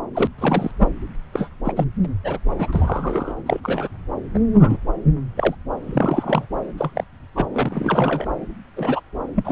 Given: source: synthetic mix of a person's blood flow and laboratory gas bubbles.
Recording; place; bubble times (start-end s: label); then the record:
Doppler ultrasound of blood flow; subclavian vein
0.14-0.28 s: bubbles
0.38-0.71 s: bubbles
0.79-0.88 s: bubbles
1.33-1.49 s: bubbles
1.65-1.73 s: bubbles
1.76-1.84 s: bubbles
2.04-2.12 s: bubbles
2.24-2.39 s: bubbles
2.56-3.33 s: bubbles
3.46-3.60 s: bubbles
3.63-3.88 s: bubbles
4.34-4.39 s: bubbles
4.54-4.77 s: bubbles
5.37-5.55 s: bubbles
5.87-6.46 s: bubbles
6.77-7.04 s: bubbles
7.35-7.49 s: bubbles
7.53-8.31 s: bubbles
8.77-9.01 s: bubbles
9.35-9.52 s: bubbles
From the record:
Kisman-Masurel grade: 242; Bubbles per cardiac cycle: several, 3 to 8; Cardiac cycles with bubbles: 100%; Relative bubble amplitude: moderate (0.250 to 0.450); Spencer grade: 3 (all of the cardiac periods contain showers or single bubble signals, but not dominating or overriding the cardiac motion signals); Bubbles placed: anywhere in the cardiac cycle